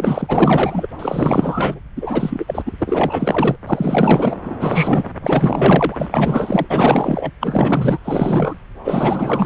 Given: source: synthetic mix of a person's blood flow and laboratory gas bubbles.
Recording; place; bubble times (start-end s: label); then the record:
Doppler ultrasound of blood flow; subclavian vein
0.00-0.87 s: bubbles
0.99-1.80 s: bubbles
1.96-2.62 s: bubbles
2.66-2.73 s: bubbles
2.79-3.56 s: bubbles
3.66-4.41 s: bubbles
4.45-4.55 s: bubbles
4.60-5.09 s: bubbles
5.21-5.96 s: bubbles
5.98-6.66 s: bubbles
6.70-7.30 s: bubbles
7.40-7.98 s: bubbles
8.04-8.56 s: bubbles
8.84-9.46 s: bubbles
From the record:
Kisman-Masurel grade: 444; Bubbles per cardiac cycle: continuous sound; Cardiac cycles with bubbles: 100%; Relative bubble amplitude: maximal (0.775 to 0.999); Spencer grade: 4 (maximum detectable bubble signal sounding continuously throughout systole and diastole of every cardiac period, and overriding the amplitude of the normal cardiac signals); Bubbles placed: anywhere in the cardiac cycle